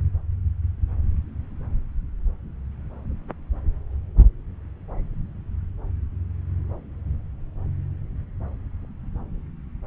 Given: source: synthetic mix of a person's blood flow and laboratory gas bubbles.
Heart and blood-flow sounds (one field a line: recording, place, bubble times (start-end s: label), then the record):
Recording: Doppler ultrasound of blood flow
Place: subclavian vein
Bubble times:
no bubbles
From the record:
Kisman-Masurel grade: 000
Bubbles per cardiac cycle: 0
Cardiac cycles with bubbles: 0%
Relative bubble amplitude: no bubbles discernible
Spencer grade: 0 (complete lack of bubble signals)